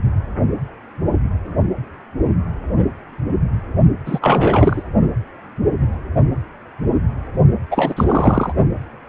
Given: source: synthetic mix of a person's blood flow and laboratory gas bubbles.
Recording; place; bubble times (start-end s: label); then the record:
Doppler ultrasound of blood flow; precordium
4.05-4.19 s: bubbles
4.21-4.83 s: bubbles
7.71-8.53 s: bubbles
From the record:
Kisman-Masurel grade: 223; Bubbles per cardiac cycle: several, 3 to 8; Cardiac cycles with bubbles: 10 to 50%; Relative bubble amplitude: loud (0.450 to 0.775); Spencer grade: 2 (many but less than half of the cardiac periods contain bubble signals, singularly or in groups); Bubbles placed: only in the low amplitude regions of the cardiac cycle